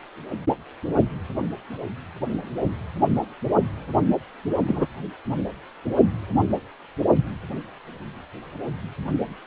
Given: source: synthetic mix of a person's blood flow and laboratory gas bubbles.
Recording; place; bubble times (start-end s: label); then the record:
Doppler ultrasound of blood flow; precordium
4.67-4.87 s: bubbles
From the record:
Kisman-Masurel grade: 113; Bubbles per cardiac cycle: 1 to 2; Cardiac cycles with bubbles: 1 to 10%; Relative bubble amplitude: loud (0.450 to 0.775); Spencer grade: 1 (occasional bubble signal discernible with the cardiac motion signal, with majority of cardiac periods free of bubbles); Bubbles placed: only in the low amplitude regions of the cardiac cycle